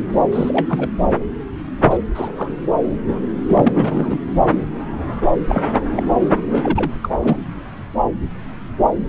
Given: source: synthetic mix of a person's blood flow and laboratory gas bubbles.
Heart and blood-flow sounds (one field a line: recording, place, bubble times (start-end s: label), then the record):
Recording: Doppler ultrasound of blood flow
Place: subclavian vein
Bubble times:
0.32-0.90 s: bubbles
1.82-1.98 s: bubbles
2.14-2.56 s: bubbles
3.48-4.19 s: bubbles
5.47-5.67 s: bubbles
5.74-5.79 s: bubbles
5.96-6.03 s: bubbles
6.52-6.92 s: bubbles
7.03-7.38 s: bubbles
From the record:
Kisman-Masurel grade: 232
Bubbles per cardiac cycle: several, 3 to 8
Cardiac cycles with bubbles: 50 to 99%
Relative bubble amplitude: moderate (0.250 to 0.450)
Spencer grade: 3 (all of the cardiac periods contain showers or single bubble signals, but not dominating or overriding the cardiac motion signals)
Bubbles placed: anywhere in the cardiac cycle